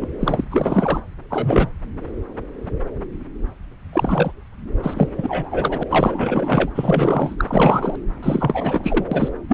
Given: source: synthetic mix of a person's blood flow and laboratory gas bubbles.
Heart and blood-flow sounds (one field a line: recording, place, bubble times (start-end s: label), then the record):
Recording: Doppler ultrasound of blood flow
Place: subclavian vein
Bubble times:
0.00-0.07 s: bubbles
0.20-0.45 s: bubbles
0.50-1.00 s: bubbles
1.30-1.71 s: bubbles
3.93-4.33 s: bubbles
4.83-5.09 s: bubbles
5.18-5.83 s: bubbles
5.89-6.70 s: bubbles
6.75-7.35 s: bubbles
7.38-7.45 s: bubbles
7.47-7.96 s: bubbles
8.22-9.05 s: bubbles
9.11-9.29 s: bubbles
9.49-9.53 s: bubbles
From the record:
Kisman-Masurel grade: 333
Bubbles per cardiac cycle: rolling drumbeat, 9 or more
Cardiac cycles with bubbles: 50 to 99%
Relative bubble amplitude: loud (0.450 to 0.775)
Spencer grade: 3 (all of the cardiac periods contain showers or single bubble signals, but not dominating or overriding the cardiac motion signals)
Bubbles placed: anywhere in the cardiac cycle